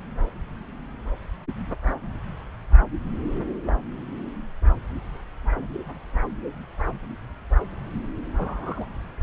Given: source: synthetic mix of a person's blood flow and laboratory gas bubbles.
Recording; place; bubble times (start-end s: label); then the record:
Doppler ultrasound of blood flow; subclavian vein
1.87-1.93 s: bubbles
3.65-3.74 s: bubbles
8.38-8.86 s: bubbles
From the record:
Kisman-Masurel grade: 121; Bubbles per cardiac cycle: 1 to 2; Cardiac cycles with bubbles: 10 to 50%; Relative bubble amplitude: barely perceptible (0.100 to 0.250); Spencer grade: 2 (many but less than half of the cardiac periods contain bubble signals, singularly or in groups); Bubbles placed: anywhere in the cardiac cycle